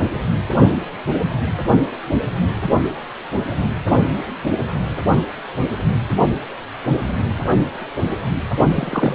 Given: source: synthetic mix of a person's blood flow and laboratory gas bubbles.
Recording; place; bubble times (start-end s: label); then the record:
Doppler ultrasound of blood flow; precordium
8.74-9.15 s: bubbles
From the record:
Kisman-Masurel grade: 212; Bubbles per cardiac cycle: several, 3 to 8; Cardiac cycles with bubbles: 1 to 10%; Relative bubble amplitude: moderate (0.250 to 0.450); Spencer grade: 1 (occasional bubble signal discernible with the cardiac motion signal, with majority of cardiac periods free of bubbles); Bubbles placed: only in the low amplitude regions of the cardiac cycle